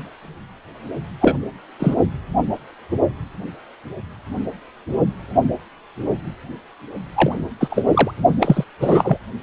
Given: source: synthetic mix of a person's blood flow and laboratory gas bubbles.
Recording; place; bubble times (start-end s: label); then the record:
Doppler ultrasound of blood flow; precordium
1.21-1.38 s: bubbles
1.79-1.95 s: bubbles
7.13-7.41 s: bubbles
7.60-7.85 s: bubbles
7.91-8.11 s: bubbles
8.40-8.64 s: bubbles
8.80-9.17 s: bubbles
From the record:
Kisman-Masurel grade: 223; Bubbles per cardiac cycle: several, 3 to 8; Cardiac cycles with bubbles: 10 to 50%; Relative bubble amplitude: loud (0.450 to 0.775); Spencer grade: 2 (many but less than half of the cardiac periods contain bubble signals, singularly or in groups); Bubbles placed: only in the low amplitude regions of the cardiac cycle